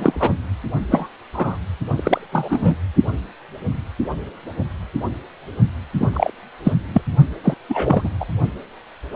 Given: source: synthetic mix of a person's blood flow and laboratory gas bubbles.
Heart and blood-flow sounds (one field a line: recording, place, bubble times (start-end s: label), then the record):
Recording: Doppler ultrasound of blood flow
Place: precordium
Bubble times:
0.00-0.34 s: bubbles
0.89-1.07 s: bubbles
1.32-1.57 s: bubbles
1.86-2.27 s: bubbles
2.32-2.75 s: bubbles
5.99-6.08 s: bubbles
6.13-6.30 s: bubbles
6.63-6.72 s: bubbles
6.93-7.02 s: bubbles
7.44-7.54 s: bubbles
7.68-8.11 s: bubbles
8.20-8.25 s: bubbles
From the record:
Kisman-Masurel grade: 223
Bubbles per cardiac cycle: several, 3 to 8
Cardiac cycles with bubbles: 10 to 50%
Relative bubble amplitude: loud (0.450 to 0.775)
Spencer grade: 2 (many but less than half of the cardiac periods contain bubble signals, singularly or in groups)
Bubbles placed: only in the low amplitude regions of the cardiac cycle